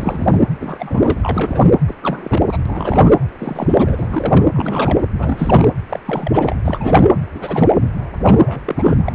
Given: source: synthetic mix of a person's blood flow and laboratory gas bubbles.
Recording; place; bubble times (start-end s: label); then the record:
Doppler ultrasound of blood flow; precordium
0.00-0.38 s: bubbles
0.60-1.71 s: bubbles
1.88-1.94 s: bubbles
2.02-2.42 s: bubbles
2.47-2.58 s: bubbles
2.65-3.14 s: bubbles
3.38-4.48 s: bubbles
4.53-5.03 s: bubbles
5.17-5.68 s: bubbles
5.89-6.00 s: bubbles
6.05-6.56 s: bubbles
6.65-7.12 s: bubbles
7.35-7.89 s: bubbles
8.23-8.42 s: bubbles
8.46-8.63 s: bubbles
8.66-8.98 s: bubbles
9.05-9.12 s: bubbles
From the record:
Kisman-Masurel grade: 342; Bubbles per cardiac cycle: rolling drumbeat, 9 or more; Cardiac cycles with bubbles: 100%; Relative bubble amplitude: moderate (0.250 to 0.450); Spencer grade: 3 (all of the cardiac periods contain showers or single bubble signals, but not dominating or overriding the cardiac motion signals); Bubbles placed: anywhere in the cardiac cycle